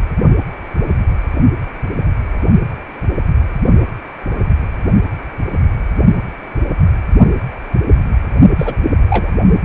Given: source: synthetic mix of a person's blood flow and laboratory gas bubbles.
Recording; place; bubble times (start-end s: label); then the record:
Doppler ultrasound of blood flow; precordium
8.59-8.77 s: bubbles
9.10-9.31 s: bubbles
From the record:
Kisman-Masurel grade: 222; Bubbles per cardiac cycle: several, 3 to 8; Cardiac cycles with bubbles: 10 to 50%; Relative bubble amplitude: moderate (0.250 to 0.450); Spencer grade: 2 (many but less than half of the cardiac periods contain bubble signals, singularly or in groups); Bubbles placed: only in the low amplitude regions of the cardiac cycle